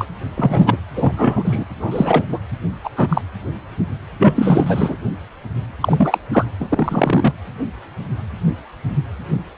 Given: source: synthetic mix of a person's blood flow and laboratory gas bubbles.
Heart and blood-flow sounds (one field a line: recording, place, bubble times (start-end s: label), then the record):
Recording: Doppler ultrasound of blood flow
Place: precordium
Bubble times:
0.00-0.05 s: bubbles
0.36-0.77 s: bubbles
0.95-1.65 s: bubbles
1.79-2.25 s: bubbles
2.32-2.39 s: bubbles
2.83-2.90 s: bubbles
2.97-3.22 s: bubbles
4.19-4.96 s: bubbles
5.80-6.18 s: bubbles
6.33-6.45 s: bubbles
6.59-7.33 s: bubbles
From the record:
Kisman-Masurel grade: 233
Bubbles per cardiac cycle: several, 3 to 8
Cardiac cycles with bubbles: 50 to 99%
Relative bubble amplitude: loud (0.450 to 0.775)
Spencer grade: 3 (all of the cardiac periods contain showers or single bubble signals, but not dominating or overriding the cardiac motion signals)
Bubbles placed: anywhere in the cardiac cycle